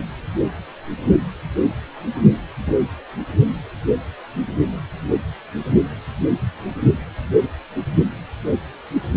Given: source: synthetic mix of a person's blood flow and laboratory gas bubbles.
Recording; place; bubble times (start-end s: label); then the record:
Doppler ultrasound of blood flow; precordium
2.66-2.76 s: bubbles
From the record:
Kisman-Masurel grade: 112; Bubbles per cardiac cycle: 1 to 2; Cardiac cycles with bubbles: 1 to 10%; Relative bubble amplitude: moderate (0.250 to 0.450); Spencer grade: 1 (occasional bubble signal discernible with the cardiac motion signal, with majority of cardiac periods free of bubbles); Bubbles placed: only in the low amplitude regions of the cardiac cycle